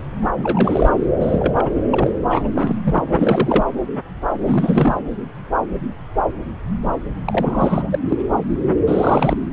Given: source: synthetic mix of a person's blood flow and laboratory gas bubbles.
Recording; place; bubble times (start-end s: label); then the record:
Doppler ultrasound of blood flow; subclavian vein
0.36-0.89 s: bubbles
1.20-1.71 s: bubbles
1.92-2.10 s: bubbles
2.26-2.48 s: bubbles
2.55-2.76 s: bubbles
2.84-3.03 s: bubbles
3.05-3.63 s: bubbles
4.41-4.96 s: bubbles
7.25-7.99 s: bubbles
8.08-8.17 s: bubbles
8.87-9.37 s: bubbles
From the record:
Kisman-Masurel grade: 332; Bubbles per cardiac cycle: rolling drumbeat, 9 or more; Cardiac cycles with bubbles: 50 to 99%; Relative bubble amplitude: moderate (0.250 to 0.450); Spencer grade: 3 (all of the cardiac periods contain showers or single bubble signals, but not dominating or overriding the cardiac motion signals); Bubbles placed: anywhere in the cardiac cycle